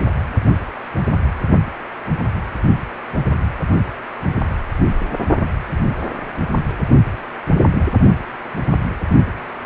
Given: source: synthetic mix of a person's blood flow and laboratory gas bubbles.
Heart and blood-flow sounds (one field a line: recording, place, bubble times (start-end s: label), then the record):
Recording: Doppler ultrasound of blood flow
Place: precordium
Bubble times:
7.74-7.88 s: bubbles
From the record:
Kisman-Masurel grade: 111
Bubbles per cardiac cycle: 1 to 2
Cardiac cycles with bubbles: 1 to 10%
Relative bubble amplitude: barely perceptible (0.100 to 0.250)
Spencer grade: 1 (occasional bubble signal discernible with the cardiac motion signal, with majority of cardiac periods free of bubbles)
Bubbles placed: only in the low amplitude regions of the cardiac cycle